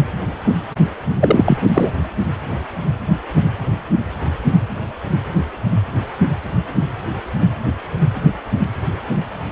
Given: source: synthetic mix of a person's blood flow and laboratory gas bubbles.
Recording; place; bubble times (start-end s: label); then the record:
Doppler ultrasound of blood flow; precordium
1.20-1.58 s: bubbles
1.74-1.92 s: bubbles
From the record:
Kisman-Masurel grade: 213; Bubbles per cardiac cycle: several, 3 to 8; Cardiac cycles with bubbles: 1 to 10%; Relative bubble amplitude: loud (0.450 to 0.775); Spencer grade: 1 (occasional bubble signal discernible with the cardiac motion signal, with majority of cardiac periods free of bubbles); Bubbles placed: anywhere in the cardiac cycle